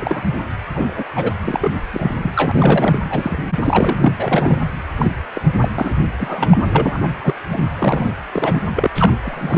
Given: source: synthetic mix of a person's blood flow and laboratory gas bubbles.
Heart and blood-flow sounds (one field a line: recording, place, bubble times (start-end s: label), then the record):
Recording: Doppler ultrasound of blood flow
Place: precordium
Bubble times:
0.00-0.41 s: bubbles
0.74-1.04 s: bubbles
1.15-1.29 s: bubbles
1.42-1.72 s: bubbles
1.92-2.32 s: bubbles
2.35-3.00 s: bubbles
3.10-3.44 s: bubbles
3.63-4.12 s: bubbles
4.18-4.59 s: bubbles
4.98-5.11 s: bubbles
5.34-5.42 s: bubbles
5.61-5.68 s: bubbles
5.78-5.92 s: bubbles
6.17-6.57 s: bubbles
6.72-7.14 s: bubbles
7.23-7.33 s: bubbles
7.51-7.65 s: bubbles
7.79-8.12 s: bubbles
8.32-8.62 s: bubbles
8.76-8.90 s: bubbles
8.95-9.13 s: bubbles
9.21-9.58 s: bubbles
From the record:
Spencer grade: 3 (all of the cardiac periods contain showers or single bubble signals, but not dominating or overriding the cardiac motion signals)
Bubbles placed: anywhere in the cardiac cycle